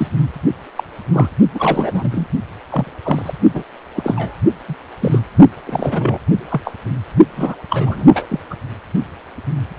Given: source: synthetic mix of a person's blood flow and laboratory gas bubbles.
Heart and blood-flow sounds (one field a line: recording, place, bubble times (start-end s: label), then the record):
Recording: Doppler ultrasound of blood flow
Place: precordium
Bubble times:
0.00-0.08 s: bubbles
0.76-0.84 s: bubbles
1.12-1.28 s: bubbles
1.54-2.27 s: bubbles
2.69-2.93 s: bubbles
3.03-3.33 s: bubbles
3.54-3.63 s: bubbles
3.96-4.38 s: bubbles
4.68-4.75 s: bubbles
5.00-5.19 s: bubbles
5.66-6.19 s: bubbles
6.50-6.61 s: bubbles
6.65-6.73 s: bubbles
7.36-7.55 s: bubbles
7.70-8.26 s: bubbles
8.29-8.39 s: bubbles
8.50-8.55 s: bubbles
From the record:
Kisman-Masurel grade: 232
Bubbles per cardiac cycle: several, 3 to 8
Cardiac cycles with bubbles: 50 to 99%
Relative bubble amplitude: moderate (0.250 to 0.450)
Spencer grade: 3 (all of the cardiac periods contain showers or single bubble signals, but not dominating or overriding the cardiac motion signals)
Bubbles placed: only in the low amplitude regions of the cardiac cycle